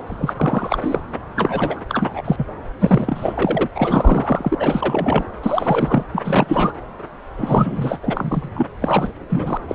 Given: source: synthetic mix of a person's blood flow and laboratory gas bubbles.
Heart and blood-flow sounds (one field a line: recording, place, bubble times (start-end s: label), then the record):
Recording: Doppler ultrasound of blood flow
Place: subclavian vein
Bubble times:
0.06-0.34 s: bubbles
0.36-0.78 s: bubbles
0.80-1.01 s: bubbles
1.36-1.81 s: bubbles
1.89-2.22 s: bubbles
2.25-2.45 s: bubbles
2.81-3.68 s: bubbles
3.75-4.55 s: bubbles
4.59-5.24 s: bubbles
5.42-6.04 s: bubbles
6.13-6.72 s: bubbles
7.37-7.98 s: bubbles
8.03-8.49 s: bubbles
8.53-8.68 s: bubbles
8.80-9.12 s: bubbles
9.29-9.57 s: bubbles
9.67-9.75 s: bubbles
From the record:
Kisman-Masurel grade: 343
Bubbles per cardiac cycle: rolling drumbeat, 9 or more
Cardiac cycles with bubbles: 100%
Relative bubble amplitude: loud (0.450 to 0.775)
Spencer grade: 3 (all of the cardiac periods contain showers or single bubble signals, but not dominating or overriding the cardiac motion signals)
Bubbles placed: anywhere in the cardiac cycle